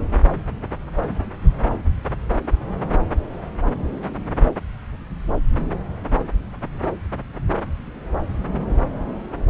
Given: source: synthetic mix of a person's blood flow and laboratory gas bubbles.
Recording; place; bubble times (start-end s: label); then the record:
Doppler ultrasound of blood flow; subclavian vein
no bubbles
From the record:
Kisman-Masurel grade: 000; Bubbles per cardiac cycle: 0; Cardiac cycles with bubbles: 0%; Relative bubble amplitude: no bubbles discernible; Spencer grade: 0 (complete lack of bubble signals)